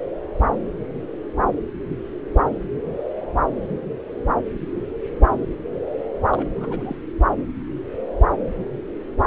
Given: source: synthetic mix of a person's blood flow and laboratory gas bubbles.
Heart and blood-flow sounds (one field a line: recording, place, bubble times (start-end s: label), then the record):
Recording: Doppler ultrasound of blood flow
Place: subclavian vein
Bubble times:
6.30-6.96 s: bubbles
From the record:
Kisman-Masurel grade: 211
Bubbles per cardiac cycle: several, 3 to 8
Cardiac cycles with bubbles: 1 to 10%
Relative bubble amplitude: barely perceptible (0.100 to 0.250)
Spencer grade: 1 (occasional bubble signal discernible with the cardiac motion signal, with majority of cardiac periods free of bubbles)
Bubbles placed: anywhere in the cardiac cycle